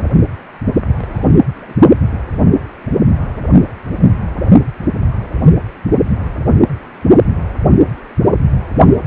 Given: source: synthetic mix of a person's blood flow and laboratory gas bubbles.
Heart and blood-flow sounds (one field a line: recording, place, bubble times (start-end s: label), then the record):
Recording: Doppler ultrasound of blood flow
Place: precordium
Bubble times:
0.75-0.81 s: bubbles
0.98-1.26 s: bubbles
1.56-1.74 s: bubbles
From the record:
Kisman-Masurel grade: 221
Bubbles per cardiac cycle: several, 3 to 8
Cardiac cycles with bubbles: 10 to 50%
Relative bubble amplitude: barely perceptible (0.100 to 0.250)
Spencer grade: 2 (many but less than half of the cardiac periods contain bubble signals, singularly or in groups)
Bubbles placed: only in the low amplitude regions of the cardiac cycle